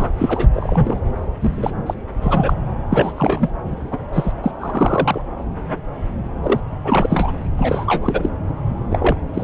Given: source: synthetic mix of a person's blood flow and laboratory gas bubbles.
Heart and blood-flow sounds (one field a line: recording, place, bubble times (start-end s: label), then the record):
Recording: Doppler ultrasound of blood flow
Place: subclavian vein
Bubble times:
0.00-0.08 s: bubbles
0.18-0.48 s: bubbles
0.53-0.97 s: bubbles
1.40-1.73 s: bubbles
1.86-1.94 s: bubbles
2.21-2.54 s: bubbles
2.90-3.14 s: bubbles
3.17-3.50 s: bubbles
3.66-3.75 s: bubbles
3.91-3.99 s: bubbles
4.12-4.33 s: bubbles
4.43-4.52 s: bubbles
4.60-5.21 s: bubbles
6.42-6.61 s: bubbles
6.84-7.32 s: bubbles
7.57-8.29 s: bubbles
8.90-9.16 s: bubbles
9.34-9.44 s: bubbles
From the record:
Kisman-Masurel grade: 333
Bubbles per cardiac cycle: rolling drumbeat, 9 or more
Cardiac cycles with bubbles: 50 to 99%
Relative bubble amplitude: loud (0.450 to 0.775)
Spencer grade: 3 (all of the cardiac periods contain showers or single bubble signals, but not dominating or overriding the cardiac motion signals)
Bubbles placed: anywhere in the cardiac cycle